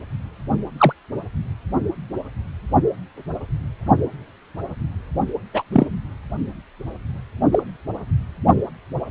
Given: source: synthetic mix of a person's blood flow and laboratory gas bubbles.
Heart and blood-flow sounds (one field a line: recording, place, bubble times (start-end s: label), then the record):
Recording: Doppler ultrasound of blood flow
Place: precordium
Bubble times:
0.78-0.93 s: bubbles
5.53-5.63 s: bubbles
5.72-5.87 s: bubbles
7.52-7.63 s: bubbles
From the record:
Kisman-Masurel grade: 123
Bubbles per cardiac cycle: 1 to 2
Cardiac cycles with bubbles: 10 to 50%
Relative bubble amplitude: loud (0.450 to 0.775)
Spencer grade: 2 (many but less than half of the cardiac periods contain bubble signals, singularly or in groups)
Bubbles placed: only in the low amplitude regions of the cardiac cycle